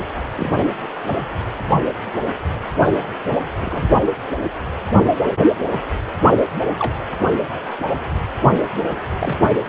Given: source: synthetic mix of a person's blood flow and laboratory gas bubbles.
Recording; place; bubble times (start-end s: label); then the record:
Doppler ultrasound of blood flow; precordium
0.35-0.64 s: bubbles
3.62-3.88 s: bubbles
6.79-6.96 s: bubbles
9.19-9.37 s: bubbles
From the record:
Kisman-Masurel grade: 122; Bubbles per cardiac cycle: 1 to 2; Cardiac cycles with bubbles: 10 to 50%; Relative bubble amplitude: moderate (0.250 to 0.450); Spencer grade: 2 (many but less than half of the cardiac periods contain bubble signals, singularly or in groups); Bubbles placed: anywhere in the cardiac cycle